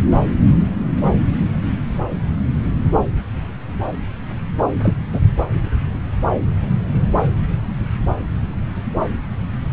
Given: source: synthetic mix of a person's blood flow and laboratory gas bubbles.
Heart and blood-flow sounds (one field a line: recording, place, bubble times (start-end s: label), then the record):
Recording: Doppler ultrasound of blood flow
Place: subclavian vein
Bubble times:
4.83-4.97 s: bubbles
5.12-5.20 s: bubbles
From the record:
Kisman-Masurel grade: 113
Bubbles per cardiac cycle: 1 to 2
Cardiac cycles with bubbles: 1 to 10%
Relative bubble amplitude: loud (0.450 to 0.775)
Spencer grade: 1 (occasional bubble signal discernible with the cardiac motion signal, with majority of cardiac periods free of bubbles)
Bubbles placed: anywhere in the cardiac cycle